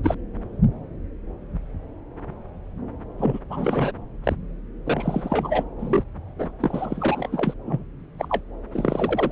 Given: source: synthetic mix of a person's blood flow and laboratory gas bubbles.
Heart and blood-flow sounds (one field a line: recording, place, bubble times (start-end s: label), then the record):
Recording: Doppler ultrasound of blood flow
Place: subclavian vein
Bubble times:
0.03-0.15 s: bubbles
3.18-3.40 s: bubbles
3.50-3.92 s: bubbles
4.24-4.35 s: bubbles
4.86-5.63 s: bubbles
5.79-6.04 s: bubbles
6.38-6.51 s: bubbles
6.60-7.54 s: bubbles
7.65-7.84 s: bubbles
8.19-8.41 s: bubbles
8.72-9.31 s: bubbles
From the record:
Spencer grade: 3 (all of the cardiac periods contain showers or single bubble signals, but not dominating or overriding the cardiac motion signals)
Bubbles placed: anywhere in the cardiac cycle